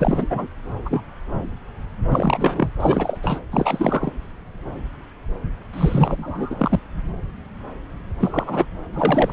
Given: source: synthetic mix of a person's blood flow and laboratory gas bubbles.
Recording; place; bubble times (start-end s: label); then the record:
Doppler ultrasound of blood flow; subclavian vein
0.00-0.27 s: bubbles
0.30-0.47 s: bubbles
0.85-1.02 s: bubbles
2.11-2.68 s: bubbles
2.80-3.17 s: bubbles
3.23-3.41 s: bubbles
3.50-4.12 s: bubbles
5.73-6.79 s: bubbles
8.20-8.66 s: bubbles
8.93-9.33 s: bubbles
From the record:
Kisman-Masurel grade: 332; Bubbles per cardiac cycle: rolling drumbeat, 9 or more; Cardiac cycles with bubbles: 50 to 99%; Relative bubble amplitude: moderate (0.250 to 0.450); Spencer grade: 3 (all of the cardiac periods contain showers or single bubble signals, but not dominating or overriding the cardiac motion signals); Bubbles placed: anywhere in the cardiac cycle